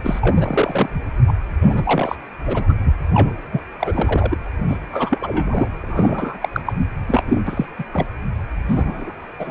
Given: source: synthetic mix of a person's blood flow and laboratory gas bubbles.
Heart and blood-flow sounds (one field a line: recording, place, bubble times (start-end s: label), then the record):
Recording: Doppler ultrasound of blood flow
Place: precordium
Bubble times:
0.04-0.88 s: bubbles
1.27-1.33 s: bubbles
1.61-2.16 s: bubbles
2.46-2.75 s: bubbles
2.84-2.94 s: bubbles
3.14-3.31 s: bubbles
3.52-3.61 s: bubbles
3.79-4.38 s: bubbles
4.67-4.77 s: bubbles
4.91-5.68 s: bubbles
5.82-6.38 s: bubbles
6.42-6.49 s: bubbles
6.52-6.62 s: bubbles
6.65-6.73 s: bubbles
7.07-7.22 s: bubbles
7.26-7.41 s: bubbles
7.45-7.65 s: bubbles
7.78-7.83 s: bubbles
7.92-8.06 s: bubbles
8.68-9.12 s: bubbles
9.38-9.51 s: bubbles
From the record:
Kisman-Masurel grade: 343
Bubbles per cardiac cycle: rolling drumbeat, 9 or more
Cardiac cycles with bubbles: 100%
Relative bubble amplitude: loud (0.450 to 0.775)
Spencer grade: 3 (all of the cardiac periods contain showers or single bubble signals, but not dominating or overriding the cardiac motion signals)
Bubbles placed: anywhere in the cardiac cycle